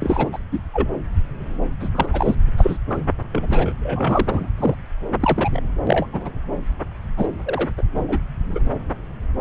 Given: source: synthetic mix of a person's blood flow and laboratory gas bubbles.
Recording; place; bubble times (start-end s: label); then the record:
Doppler ultrasound of blood flow; subclavian vein
0.00-0.29 s: bubbles
0.32-0.38 s: bubbles
0.51-0.60 s: bubbles
0.74-0.90 s: bubbles
1.80-1.89 s: bubbles
1.94-2.35 s: bubbles
2.56-2.78 s: bubbles
2.90-2.98 s: bubbles
3.33-3.72 s: bubbles
3.79-4.49 s: bubbles
4.57-4.75 s: bubbles
5.20-5.61 s: bubbles
5.87-6.07 s: bubbles
6.12-6.31 s: bubbles
7.17-7.27 s: bubbles
7.45-7.69 s: bubbles
7.77-7.83 s: bubbles
7.95-8.03 s: bubbles
8.08-8.18 s: bubbles
8.49-8.60 s: bubbles
From the record:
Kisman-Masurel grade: 232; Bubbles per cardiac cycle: several, 3 to 8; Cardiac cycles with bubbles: 50 to 99%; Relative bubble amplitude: moderate (0.250 to 0.450); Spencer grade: 3 (all of the cardiac periods contain showers or single bubble signals, but not dominating or overriding the cardiac motion signals); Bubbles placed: anywhere in the cardiac cycle